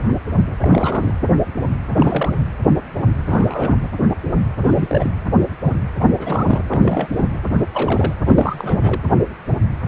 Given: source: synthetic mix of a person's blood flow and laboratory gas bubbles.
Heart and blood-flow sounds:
Doppler ultrasound of blood flow; precordium
0.61-1.13 s: bubbles
1.89-2.35 s: bubbles
3.25-3.77 s: bubbles
4.62-5.10 s: bubbles
5.98-6.63 s: bubbles
6.70-7.39 s: bubbles
7.51-8.14 s: bubbles
8.26-9.03 s: bubbles
From the record:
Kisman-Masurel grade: 332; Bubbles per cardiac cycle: rolling drumbeat, 9 or more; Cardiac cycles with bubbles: 50 to 99%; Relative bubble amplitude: moderate (0.250 to 0.450); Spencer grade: 3 (all of the cardiac periods contain showers or single bubble signals, but not dominating or overriding the cardiac motion signals); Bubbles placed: anywhere in the cardiac cycle

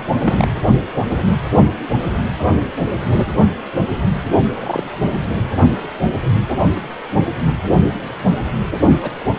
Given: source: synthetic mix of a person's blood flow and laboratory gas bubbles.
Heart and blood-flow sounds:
Doppler ultrasound of blood flow; precordium
0.00-0.03 s: bubbles
0.24-0.48 s: bubbles
4.56-4.83 s: bubbles
9.02-9.11 s: bubbles
From the record:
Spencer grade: 2 (many but less than half of the cardiac periods contain bubble signals, singularly or in groups); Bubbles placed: only in the low amplitude regions of the cardiac cycle

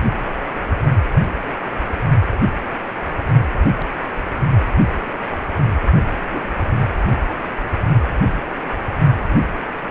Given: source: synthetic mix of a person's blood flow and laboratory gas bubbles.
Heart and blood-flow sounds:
Doppler ultrasound of blood flow; precordium
6.33-6.42 s: bubbles
From the record:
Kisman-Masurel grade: 123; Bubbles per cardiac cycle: 1 to 2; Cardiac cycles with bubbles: 10 to 50%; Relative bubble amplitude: loud (0.450 to 0.775); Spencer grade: 2 (many but less than half of the cardiac periods contain bubble signals, singularly or in groups); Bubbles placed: only in the low amplitude regions of the cardiac cycle

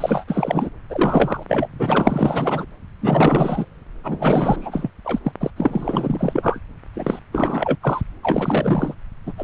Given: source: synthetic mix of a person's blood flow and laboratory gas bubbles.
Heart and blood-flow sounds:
Doppler ultrasound of blood flow; subclavian vein
0.00-0.24 s: bubbles
0.27-0.70 s: bubbles
0.89-1.44 s: bubbles
1.48-1.69 s: bubbles
1.79-2.66 s: bubbles
3.01-3.65 s: bubbles
4.04-4.91 s: bubbles
5.04-5.19 s: bubbles
5.24-5.32 s: bubbles
5.40-5.50 s: bubbles
5.56-6.59 s: bubbles
6.94-7.20 s: bubbles
7.32-7.76 s: bubbles
7.82-8.01 s: bubbles
8.23-8.94 s: bubbles
9.26-9.33 s: bubbles
9.38-9.44 s: bubbles
From the record:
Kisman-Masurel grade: 444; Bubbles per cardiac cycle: continuous sound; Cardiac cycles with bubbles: 100%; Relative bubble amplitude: maximal (0.775 to 0.999); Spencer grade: 4 (maximum detectable bubble signal sounding continuously throughout systole and diastole of every cardiac period, and overriding the amplitude of the normal cardiac signals); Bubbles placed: anywhere in the cardiac cycle

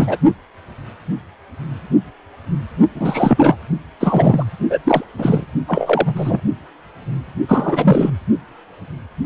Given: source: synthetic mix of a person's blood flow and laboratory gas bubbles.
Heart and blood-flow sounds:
Doppler ultrasound of blood flow; precordium
0.00-0.18 s: bubbles
2.94-3.56 s: bubbles
4.00-4.44 s: bubbles
4.70-4.79 s: bubbles
4.84-5.04 s: bubbles
5.17-5.46 s: bubbles
5.67-6.41 s: bubbles
7.48-8.10 s: bubbles
From the record:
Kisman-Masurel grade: 333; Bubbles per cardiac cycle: rolling drumbeat, 9 or more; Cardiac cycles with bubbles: 50 to 99%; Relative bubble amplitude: loud (0.450 to 0.775); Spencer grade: 3 (all of the cardiac periods contain showers or single bubble signals, but not dominating or overriding the cardiac motion signals); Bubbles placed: only in the low amplitude regions of the cardiac cycle

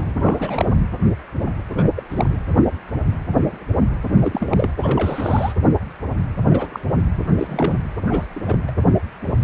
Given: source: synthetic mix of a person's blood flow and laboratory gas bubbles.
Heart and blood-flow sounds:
Doppler ultrasound of blood flow; precordium
0.00-0.12 s: bubbles
0.22-0.66 s: bubbles
1.74-1.90 s: bubbles
1.96-2.03 s: bubbles
2.09-2.38 s: bubbles
4.14-4.70 s: bubbles
4.78-5.53 s: bubbles
6.50-6.80 s: bubbles
7.38-7.79 s: bubbles
8.09-8.26 s: bubbles
8.35-8.40 s: bubbles
8.46-8.58 s: bubbles
8.67-8.71 s: bubbles
From the record:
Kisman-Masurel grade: 232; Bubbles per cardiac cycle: several, 3 to 8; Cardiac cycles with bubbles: 50 to 99%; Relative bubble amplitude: moderate (0.250 to 0.450); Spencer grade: 3 (all of the cardiac periods contain showers or single bubble signals, but not dominating or overriding the cardiac motion signals); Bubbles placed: anywhere in the cardiac cycle

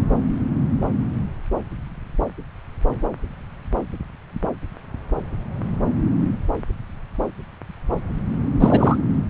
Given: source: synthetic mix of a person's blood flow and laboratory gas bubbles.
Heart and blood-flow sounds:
Doppler ultrasound of blood flow; subclavian vein
8.60-8.97 s: bubbles
From the record:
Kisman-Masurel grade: 213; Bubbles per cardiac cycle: several, 3 to 8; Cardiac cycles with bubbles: 1 to 10%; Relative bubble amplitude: loud (0.450 to 0.775); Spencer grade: 1 (occasional bubble signal discernible with the cardiac motion signal, with majority of cardiac periods free of bubbles); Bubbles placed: anywhere in the cardiac cycle

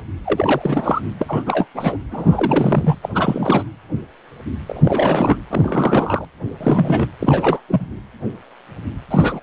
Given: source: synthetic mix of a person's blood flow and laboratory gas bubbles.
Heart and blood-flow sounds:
Doppler ultrasound of blood flow; precordium
0.24-1.01 s: bubbles
1.19-1.66 s: bubbles
1.74-1.97 s: bubbles
2.11-2.95 s: bubbles
3.02-3.09 s: bubbles
3.14-3.63 s: bubbles
4.66-5.36 s: bubbles
5.48-6.25 s: bubbles
6.61-7.08 s: bubbles
7.19-7.61 s: bubbles
7.68-7.86 s: bubbles
9.10-9.40 s: bubbles
From the record:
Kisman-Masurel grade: 332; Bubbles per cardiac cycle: rolling drumbeat, 9 or more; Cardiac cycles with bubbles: 50 to 99%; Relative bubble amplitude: moderate (0.250 to 0.450); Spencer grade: 3 (all of the cardiac periods contain showers or single bubble signals, but not dominating or overriding the cardiac motion signals); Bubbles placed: anywhere in the cardiac cycle

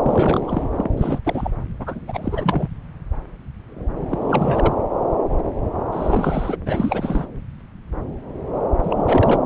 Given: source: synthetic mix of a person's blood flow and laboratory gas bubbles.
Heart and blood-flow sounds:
Doppler ultrasound of blood flow; subclavian vein
0.02-0.43 s: bubbles
0.47-0.67 s: bubbles
0.76-0.87 s: bubbles
0.97-1.19 s: bubbles
1.25-1.51 s: bubbles
1.79-2.67 s: bubbles
4.11-4.75 s: bubbles
5.93-6.56 s: bubbles
6.66-7.25 s: bubbles
8.83-9.40 s: bubbles
From the record:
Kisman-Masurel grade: 332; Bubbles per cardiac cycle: rolling drumbeat, 9 or more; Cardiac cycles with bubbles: 50 to 99%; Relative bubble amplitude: moderate (0.250 to 0.450); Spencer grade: 3 (all of the cardiac periods contain showers or single bubble signals, but not dominating or overriding the cardiac motion signals); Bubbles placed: anywhere in the cardiac cycle

